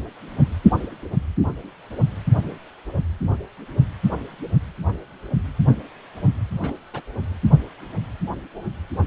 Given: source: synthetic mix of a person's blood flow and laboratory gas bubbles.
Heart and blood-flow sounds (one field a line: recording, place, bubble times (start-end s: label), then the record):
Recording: Doppler ultrasound of blood flow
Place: precordium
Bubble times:
6.61-6.73 s: bubbles
6.93-7.01 s: bubbles
From the record:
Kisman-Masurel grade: 111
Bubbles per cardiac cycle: 1 to 2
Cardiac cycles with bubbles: 1 to 10%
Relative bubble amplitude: barely perceptible (0.100 to 0.250)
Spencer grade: 1 (occasional bubble signal discernible with the cardiac motion signal, with majority of cardiac periods free of bubbles)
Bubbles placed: anywhere in the cardiac cycle